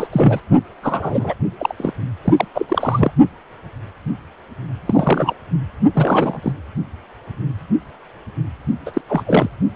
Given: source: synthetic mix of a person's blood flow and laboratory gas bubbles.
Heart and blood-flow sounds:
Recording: Doppler ultrasound of blood flow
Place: precordium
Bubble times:
0.00-0.07 s: bubbles
0.12-0.40 s: bubbles
0.82-1.34 s: bubbles
1.58-1.73 s: bubbles
1.77-1.93 s: bubbles
2.24-2.34 s: bubbles
2.37-2.45 s: bubbles
2.54-3.12 s: bubbles
4.85-5.34 s: bubbles
5.92-6.40 s: bubbles
6.42-6.52 s: bubbles
8.86-8.91 s: bubbles
8.94-9.01 s: bubbles
9.10-9.23 s: bubbles
9.27-9.50 s: bubbles
From the record:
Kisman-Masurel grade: 333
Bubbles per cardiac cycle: rolling drumbeat, 9 or more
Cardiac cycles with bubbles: 50 to 99%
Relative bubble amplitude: loud (0.450 to 0.775)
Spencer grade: 3 (all of the cardiac periods contain showers or single bubble signals, but not dominating or overriding the cardiac motion signals)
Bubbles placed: only in the low amplitude regions of the cardiac cycle

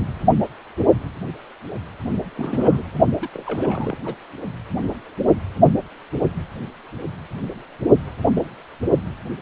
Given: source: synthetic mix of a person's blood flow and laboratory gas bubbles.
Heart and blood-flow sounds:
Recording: Doppler ultrasound of blood flow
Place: precordium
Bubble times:
2.36-2.85 s: bubbles
3.21-3.29 s: bubbles
3.33-3.44 s: bubbles
3.46-3.96 s: bubbles
4.04-4.16 s: bubbles
From the record:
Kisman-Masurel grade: 221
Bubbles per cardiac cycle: several, 3 to 8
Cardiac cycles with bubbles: 10 to 50%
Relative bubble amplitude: barely perceptible (0.100 to 0.250)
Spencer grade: 2 (many but less than half of the cardiac periods contain bubble signals, singularly or in groups)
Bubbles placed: only in the low amplitude regions of the cardiac cycle

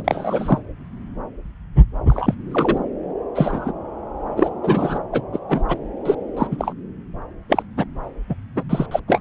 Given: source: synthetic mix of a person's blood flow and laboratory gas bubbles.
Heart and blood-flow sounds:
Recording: Doppler ultrasound of blood flow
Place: subclavian vein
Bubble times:
0.00-0.58 s: bubbles
2.08-2.34 s: bubbles
2.51-2.77 s: bubbles
3.34-3.72 s: bubbles
4.36-4.50 s: bubbles
4.62-4.98 s: bubbles
5.12-5.22 s: bubbles
5.33-5.39 s: bubbles
5.49-5.62 s: bubbles
5.68-5.78 s: bubbles
6.05-6.15 s: bubbles
6.37-6.47 s: bubbles
6.51-6.73 s: bubbles
7.49-7.62 s: bubbles
7.77-7.85 s: bubbles
8.29-8.35 s: bubbles
8.55-8.63 s: bubbles
8.69-8.86 s: bubbles
8.91-8.99 s: bubbles
9.07-9.20 s: bubbles
From the record:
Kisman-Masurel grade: 233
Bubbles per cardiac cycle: several, 3 to 8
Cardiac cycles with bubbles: 50 to 99%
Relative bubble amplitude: loud (0.450 to 0.775)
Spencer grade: 3 (all of the cardiac periods contain showers or single bubble signals, but not dominating or overriding the cardiac motion signals)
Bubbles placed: anywhere in the cardiac cycle

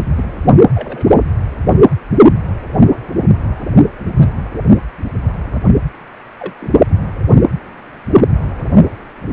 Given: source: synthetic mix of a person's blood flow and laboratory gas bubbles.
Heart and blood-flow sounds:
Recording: Doppler ultrasound of blood flow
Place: precordium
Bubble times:
0.00-0.05 s: bubbles
0.16-0.32 s: bubbles
0.74-1.07 s: bubbles
4.14-4.28 s: bubbles
6.39-6.53 s: bubbles
6.60-6.74 s: bubbles
8.07-8.25 s: bubbles
From the record:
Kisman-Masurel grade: 121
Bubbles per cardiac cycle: 1 to 2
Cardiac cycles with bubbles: 10 to 50%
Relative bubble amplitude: barely perceptible (0.100 to 0.250)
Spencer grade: 2 (many but less than half of the cardiac periods contain bubble signals, singularly or in groups)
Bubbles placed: anywhere in the cardiac cycle

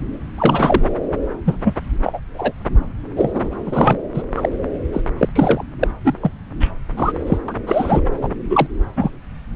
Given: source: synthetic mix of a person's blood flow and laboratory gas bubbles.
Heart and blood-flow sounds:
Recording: Doppler ultrasound of blood flow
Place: subclavian vein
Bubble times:
0.38-0.90 s: bubbles
1.45-1.57 s: bubbles
1.65-1.73 s: bubbles
2.04-2.20 s: bubbles
2.34-2.52 s: bubbles
3.16-3.49 s: bubbles
3.66-3.96 s: bubbles
4.14-4.22 s: bubbles
4.37-4.49 s: bubbles
4.92-5.01 s: bubbles
5.17-5.29 s: bubbles
5.35-5.64 s: bubbles
5.79-5.88 s: bubbles
6.04-6.14 s: bubbles
6.22-6.31 s: bubbles
6.60-6.71 s: bubbles
6.96-7.12 s: bubbles
7.26-7.38 s: bubbles
7.48-7.54 s: bubbles
7.67-8.01 s: bubbles
8.22-8.29 s: bubbles
8.49-8.66 s: bubbles
8.96-9.11 s: bubbles
From the record:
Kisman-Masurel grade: 243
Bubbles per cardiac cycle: several, 3 to 8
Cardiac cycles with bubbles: 100%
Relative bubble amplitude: loud (0.450 to 0.775)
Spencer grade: 3 (all of the cardiac periods contain showers or single bubble signals, but not dominating or overriding the cardiac motion signals)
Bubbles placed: anywhere in the cardiac cycle

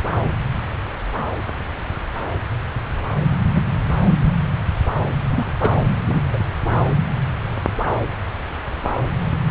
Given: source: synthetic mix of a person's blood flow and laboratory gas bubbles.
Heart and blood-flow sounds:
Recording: Doppler ultrasound of blood flow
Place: subclavian vein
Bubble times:
3.55-3.62 s: bubbles
4.23-4.34 s: bubbles
5.27-5.54 s: bubbles
5.61-5.70 s: bubbles
6.07-6.21 s: bubbles
6.33-6.38 s: bubbles
From the record:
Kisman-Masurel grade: 123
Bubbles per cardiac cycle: 1 to 2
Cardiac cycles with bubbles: 10 to 50%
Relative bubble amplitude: loud (0.450 to 0.775)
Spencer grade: 2 (many but less than half of the cardiac periods contain bubble signals, singularly or in groups)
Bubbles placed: anywhere in the cardiac cycle

